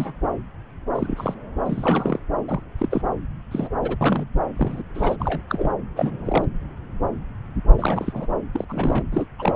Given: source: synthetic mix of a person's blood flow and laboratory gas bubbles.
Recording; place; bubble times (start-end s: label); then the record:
Doppler ultrasound of blood flow; subclavian vein
0.00-0.13 s: bubbles
0.95-1.34 s: bubbles
1.66-2.19 s: bubbles
2.48-2.62 s: bubbles
2.78-3.02 s: bubbles
3.51-3.69 s: bubbles
3.73-3.78 s: bubbles
3.82-3.97 s: bubbles
4.01-4.24 s: bubbles
4.56-4.82 s: bubbles
4.94-5.16 s: bubbles
5.19-5.41 s: bubbles
5.49-5.72 s: bubbles
5.96-6.44 s: bubbles
7.78-8.27 s: bubbles
8.54-8.64 s: bubbles
8.69-9.03 s: bubbles
9.11-9.27 s: bubbles
9.38-9.56 s: bubbles
From the record:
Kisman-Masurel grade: 232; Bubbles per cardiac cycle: several, 3 to 8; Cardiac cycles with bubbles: 50 to 99%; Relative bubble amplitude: moderate (0.250 to 0.450); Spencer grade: 3 (all of the cardiac periods contain showers or single bubble signals, but not dominating or overriding the cardiac motion signals); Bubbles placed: anywhere in the cardiac cycle